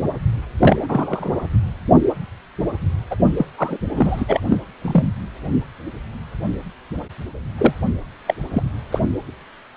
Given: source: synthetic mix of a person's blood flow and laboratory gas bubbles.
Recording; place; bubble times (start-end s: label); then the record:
Doppler ultrasound of blood flow; precordium
0.59-1.44 s: bubbles
3.10-3.16 s: bubbles
3.37-3.46 s: bubbles
3.58-3.79 s: bubbles
3.90-4.24 s: bubbles
4.28-4.41 s: bubbles
4.49-4.57 s: bubbles
4.82-5.04 s: bubbles
7.58-7.73 s: bubbles
8.27-8.34 s: bubbles
8.51-8.62 s: bubbles
8.92-9.01 s: bubbles
From the record:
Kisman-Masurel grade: 222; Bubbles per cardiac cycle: several, 3 to 8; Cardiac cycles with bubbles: 10 to 50%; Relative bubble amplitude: moderate (0.250 to 0.450); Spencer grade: 2 (many but less than half of the cardiac periods contain bubble signals, singularly or in groups); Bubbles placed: anywhere in the cardiac cycle